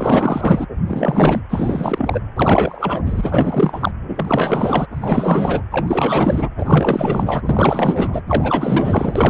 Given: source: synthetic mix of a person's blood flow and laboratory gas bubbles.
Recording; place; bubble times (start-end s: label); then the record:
Doppler ultrasound of blood flow; precordium
0.00-0.66 s: bubbles
0.87-1.42 s: bubbles
1.50-2.21 s: bubbles
2.35-3.00 s: bubbles
3.06-3.91 s: bubbles
4.08-4.87 s: bubbles
4.92-5.62 s: bubbles
5.71-6.48 s: bubbles
6.58-8.21 s: bubbles
8.27-9.30 s: bubbles
From the record:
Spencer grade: 4 (maximum detectable bubble signal sounding continuously throughout systole and diastole of every cardiac period, and overriding the amplitude of the normal cardiac signals); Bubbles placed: anywhere in the cardiac cycle